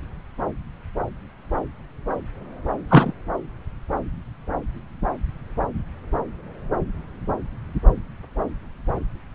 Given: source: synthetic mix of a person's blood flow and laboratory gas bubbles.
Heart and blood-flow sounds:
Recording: Doppler ultrasound of blood flow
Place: subclavian vein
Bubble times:
2.88-3.12 s: bubbles
From the record:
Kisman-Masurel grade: 213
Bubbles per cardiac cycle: several, 3 to 8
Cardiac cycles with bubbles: 1 to 10%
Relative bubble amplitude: loud (0.450 to 0.775)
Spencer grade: 1 (occasional bubble signal discernible with the cardiac motion signal, with majority of cardiac periods free of bubbles)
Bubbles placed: anywhere in the cardiac cycle

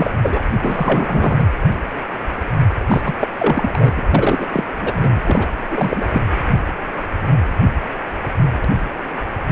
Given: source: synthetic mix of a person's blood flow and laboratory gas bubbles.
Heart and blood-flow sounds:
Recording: Doppler ultrasound of blood flow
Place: precordium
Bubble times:
0.00-0.10 s: bubbles
0.22-0.44 s: bubbles
0.62-1.48 s: bubbles
2.88-3.01 s: bubbles
3.03-3.15 s: bubbles
3.21-3.28 s: bubbles
3.38-3.92 s: bubbles
3.95-4.02 s: bubbles
4.10-4.46 s: bubbles
4.53-4.67 s: bubbles
4.81-5.21 s: bubbles
5.26-5.47 s: bubbles
5.71-6.04 s: bubbles
6.13-6.21 s: bubbles
From the record:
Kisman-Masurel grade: 333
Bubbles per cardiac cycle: rolling drumbeat, 9 or more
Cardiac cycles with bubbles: 50 to 99%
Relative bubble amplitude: loud (0.450 to 0.775)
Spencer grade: 3 (all of the cardiac periods contain showers or single bubble signals, but not dominating or overriding the cardiac motion signals)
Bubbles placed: anywhere in the cardiac cycle

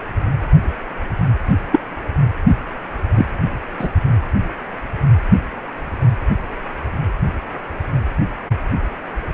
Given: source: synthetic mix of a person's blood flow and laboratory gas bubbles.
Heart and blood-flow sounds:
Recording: Doppler ultrasound of blood flow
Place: precordium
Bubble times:
1.71-1.80 s: bubbles
3.15-3.26 s: bubbles
3.79-3.88 s: bubbles
From the record:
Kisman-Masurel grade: 123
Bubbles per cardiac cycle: 1 to 2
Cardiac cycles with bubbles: 10 to 50%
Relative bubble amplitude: loud (0.450 to 0.775)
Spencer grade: 2 (many but less than half of the cardiac periods contain bubble signals, singularly or in groups)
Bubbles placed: anywhere in the cardiac cycle

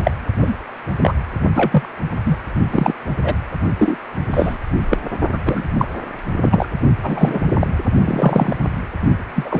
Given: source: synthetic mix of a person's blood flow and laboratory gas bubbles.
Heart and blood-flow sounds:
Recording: Doppler ultrasound of blood flow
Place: precordium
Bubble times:
0.00-0.11 s: bubbles
0.41-0.56 s: bubbles
0.99-1.14 s: bubbles
1.54-1.87 s: bubbles
2.25-2.38 s: bubbles
2.71-2.93 s: bubbles
3.25-3.35 s: bubbles
3.79-3.96 s: bubbles
4.30-4.58 s: bubbles
4.89-4.97 s: bubbles
5.33-5.38 s: bubbles
5.46-5.63 s: bubbles
5.75-5.86 s: bubbles
6.42-6.66 s: bubbles
7.02-7.41 s: bubbles
7.59-7.67 s: bubbles
8.04-8.56 s: bubbles
9.35-9.60 s: bubbles
From the record:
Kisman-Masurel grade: 243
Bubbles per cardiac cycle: several, 3 to 8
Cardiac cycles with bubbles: 100%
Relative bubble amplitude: loud (0.450 to 0.775)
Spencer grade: 3 (all of the cardiac periods contain showers or single bubble signals, but not dominating or overriding the cardiac motion signals)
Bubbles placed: only in the low amplitude regions of the cardiac cycle

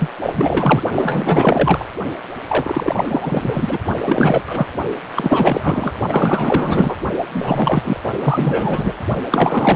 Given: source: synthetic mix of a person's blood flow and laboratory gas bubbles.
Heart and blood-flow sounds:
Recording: Doppler ultrasound of blood flow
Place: precordium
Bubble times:
0.00-0.10 s: bubbles
0.21-0.82 s: bubbles
0.94-1.85 s: bubbles
2.48-3.78 s: bubbles
4.04-4.71 s: bubbles
5.16-5.93 s: bubbles
6.08-6.96 s: bubbles
7.33-8.00 s: bubbles
8.03-8.10 s: bubbles
8.20-8.93 s: bubbles
9.31-9.76 s: bubbles
From the record:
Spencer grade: 4 (maximum detectable bubble signal sounding continuously throughout systole and diastole of every cardiac period, and overriding the amplitude of the normal cardiac signals)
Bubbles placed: only in the low amplitude regions of the cardiac cycle

